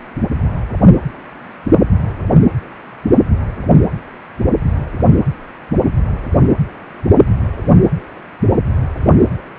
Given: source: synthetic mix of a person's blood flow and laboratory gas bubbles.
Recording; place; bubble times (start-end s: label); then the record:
Doppler ultrasound of blood flow; precordium
no bubbles
From the record:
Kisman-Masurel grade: 000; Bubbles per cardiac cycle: 0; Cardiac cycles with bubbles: 0%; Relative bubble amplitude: no bubbles discernible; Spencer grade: 0 (complete lack of bubble signals)